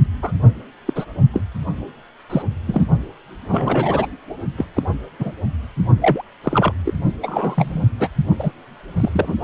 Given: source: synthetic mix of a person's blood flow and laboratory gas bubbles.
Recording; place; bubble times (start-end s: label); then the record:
Doppler ultrasound of blood flow; precordium
0.22-0.32 s: bubbles
0.86-1.05 s: bubbles
1.33-1.42 s: bubbles
2.29-2.42 s: bubbles
2.67-2.86 s: bubbles
3.48-4.07 s: bubbles
4.57-4.66 s: bubbles
4.76-4.83 s: bubbles
5.19-5.31 s: bubbles
6.01-6.22 s: bubbles
6.43-6.72 s: bubbles
6.85-6.94 s: bubbles
7.23-7.83 s: bubbles
7.99-8.09 s: bubbles
8.39-8.52 s: bubbles
9.00-9.36 s: bubbles
From the record:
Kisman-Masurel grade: 242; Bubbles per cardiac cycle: several, 3 to 8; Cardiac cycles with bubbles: 100%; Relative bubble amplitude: moderate (0.250 to 0.450); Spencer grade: 3 (all of the cardiac periods contain showers or single bubble signals, but not dominating or overriding the cardiac motion signals); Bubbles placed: only in the low amplitude regions of the cardiac cycle